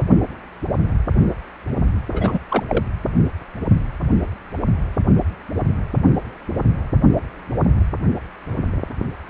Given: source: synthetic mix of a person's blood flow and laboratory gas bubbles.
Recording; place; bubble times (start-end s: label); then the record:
Doppler ultrasound of blood flow; precordium
2.11-2.38 s: bubbles
2.50-2.63 s: bubbles
2.68-2.85 s: bubbles
From the record:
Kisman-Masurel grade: 212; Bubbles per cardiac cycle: several, 3 to 8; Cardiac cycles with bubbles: 1 to 10%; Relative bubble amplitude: moderate (0.250 to 0.450); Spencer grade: 1 (occasional bubble signal discernible with the cardiac motion signal, with majority of cardiac periods free of bubbles); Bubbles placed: anywhere in the cardiac cycle